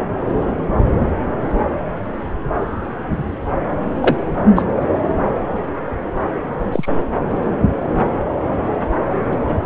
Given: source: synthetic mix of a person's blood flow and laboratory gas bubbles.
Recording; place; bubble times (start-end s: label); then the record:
Doppler ultrasound of blood flow; subclavian vein
4.02-4.17 s: bubbles
4.56-4.62 s: bubbles
6.71-6.88 s: bubbles
9.31-9.37 s: bubbles
From the record:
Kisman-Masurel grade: 123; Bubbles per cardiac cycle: 1 to 2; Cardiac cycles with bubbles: 10 to 50%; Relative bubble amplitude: loud (0.450 to 0.775); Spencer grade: 2 (many but less than half of the cardiac periods contain bubble signals, singularly or in groups); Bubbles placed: anywhere in the cardiac cycle